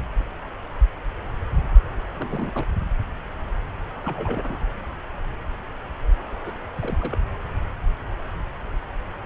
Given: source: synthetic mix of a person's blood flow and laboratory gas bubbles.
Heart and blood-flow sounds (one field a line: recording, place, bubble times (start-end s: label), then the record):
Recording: Doppler ultrasound of blood flow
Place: subclavian vein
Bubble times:
2.17-2.65 s: bubbles
4.02-4.59 s: bubbles
6.44-6.53 s: bubbles
6.81-7.20 s: bubbles
From the record:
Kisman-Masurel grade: 221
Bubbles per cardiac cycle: several, 3 to 8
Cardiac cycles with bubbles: 10 to 50%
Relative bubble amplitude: barely perceptible (0.100 to 0.250)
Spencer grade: 2 (many but less than half of the cardiac periods contain bubble signals, singularly or in groups)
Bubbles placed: anywhere in the cardiac cycle